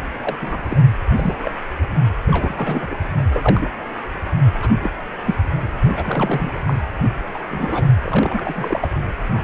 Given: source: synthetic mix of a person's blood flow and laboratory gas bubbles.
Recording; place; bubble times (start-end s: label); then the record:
Doppler ultrasound of blood flow; precordium
0.21-0.36 s: bubbles
0.41-0.57 s: bubbles
0.63-0.80 s: bubbles
1.16-1.35 s: bubbles
1.42-1.51 s: bubbles
2.28-2.87 s: bubbles
2.91-2.98 s: bubbles
3.33-3.71 s: bubbles
4.61-4.72 s: bubbles
4.82-4.90 s: bubbles
5.25-5.36 s: bubbles
5.84-6.60 s: bubbles
6.67-6.75 s: bubbles
7.34-7.39 s: bubbles
7.50-7.86 s: bubbles
8.03-8.88 s: bubbles
9.33-9.44 s: bubbles
From the record:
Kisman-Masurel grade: 242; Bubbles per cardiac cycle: several, 3 to 8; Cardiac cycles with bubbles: 100%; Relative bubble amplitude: moderate (0.250 to 0.450); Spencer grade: 3 (all of the cardiac periods contain showers or single bubble signals, but not dominating or overriding the cardiac motion signals); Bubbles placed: anywhere in the cardiac cycle